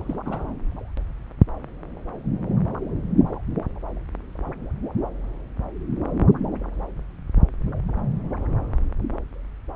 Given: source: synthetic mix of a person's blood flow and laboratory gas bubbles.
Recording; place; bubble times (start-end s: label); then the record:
Doppler ultrasound of blood flow; subclavian vein
0.00-0.15 s: bubbles
0.25-0.48 s: bubbles
From the record:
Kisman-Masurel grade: 211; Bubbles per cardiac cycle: several, 3 to 8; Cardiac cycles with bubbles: 1 to 10%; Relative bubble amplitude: barely perceptible (0.100 to 0.250); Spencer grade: 1 (occasional bubble signal discernible with the cardiac motion signal, with majority of cardiac periods free of bubbles); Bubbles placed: anywhere in the cardiac cycle